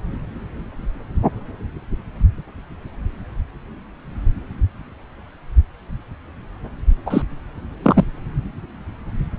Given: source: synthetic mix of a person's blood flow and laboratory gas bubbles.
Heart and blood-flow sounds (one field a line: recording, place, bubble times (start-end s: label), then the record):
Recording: Doppler ultrasound of blood flow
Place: subclavian vein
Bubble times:
7.06-7.22 s: bubbles
7.82-8.04 s: bubbles
From the record:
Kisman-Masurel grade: 213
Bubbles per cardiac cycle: several, 3 to 8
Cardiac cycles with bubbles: 1 to 10%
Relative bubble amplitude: loud (0.450 to 0.775)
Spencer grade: 1 (occasional bubble signal discernible with the cardiac motion signal, with majority of cardiac periods free of bubbles)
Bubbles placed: anywhere in the cardiac cycle